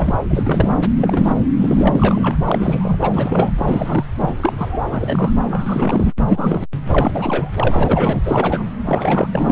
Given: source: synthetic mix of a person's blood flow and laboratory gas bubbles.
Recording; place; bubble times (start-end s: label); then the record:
Doppler ultrasound of blood flow; subclavian vein
0.00-0.18 s: bubbles
0.29-0.77 s: bubbles
0.97-1.37 s: bubbles
1.58-2.36 s: bubbles
2.46-3.52 s: bubbles
3.56-4.04 s: bubbles
4.17-4.78 s: bubbles
4.87-5.33 s: bubbles
5.50-6.12 s: bubbles
6.29-6.65 s: bubbles
6.92-7.51 s: bubbles
7.55-8.19 s: bubbles
8.24-8.64 s: bubbles
8.86-9.31 s: bubbles
9.35-9.52 s: bubbles
From the record:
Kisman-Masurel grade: 332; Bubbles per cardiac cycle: rolling drumbeat, 9 or more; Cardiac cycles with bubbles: 50 to 99%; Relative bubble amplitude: moderate (0.250 to 0.450); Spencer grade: 3 (all of the cardiac periods contain showers or single bubble signals, but not dominating or overriding the cardiac motion signals); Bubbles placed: anywhere in the cardiac cycle